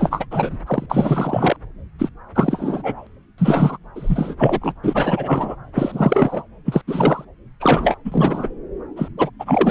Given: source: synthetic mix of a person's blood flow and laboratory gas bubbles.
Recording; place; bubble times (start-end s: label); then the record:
Doppler ultrasound of blood flow; subclavian vein
0.00-0.26 s: bubbles
0.31-0.57 s: bubbles
0.67-0.86 s: bubbles
0.90-1.56 s: bubbles
1.98-2.09 s: bubbles
2.34-3.07 s: bubbles
3.38-3.77 s: bubbles
3.95-4.35 s: bubbles
4.39-4.74 s: bubbles
4.83-5.56 s: bubbles
5.75-6.43 s: bubbles
6.65-6.82 s: bubbles
6.87-7.25 s: bubbles
7.60-7.97 s: bubbles
8.04-8.47 s: bubbles
8.96-9.08 s: bubbles
9.17-9.30 s: bubbles
9.39-9.71 s: bubbles
From the record:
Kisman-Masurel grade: 343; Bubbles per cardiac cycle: rolling drumbeat, 9 or more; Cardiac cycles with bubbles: 100%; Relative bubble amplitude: loud (0.450 to 0.775); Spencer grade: 3 (all of the cardiac periods contain showers or single bubble signals, but not dominating or overriding the cardiac motion signals); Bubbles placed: anywhere in the cardiac cycle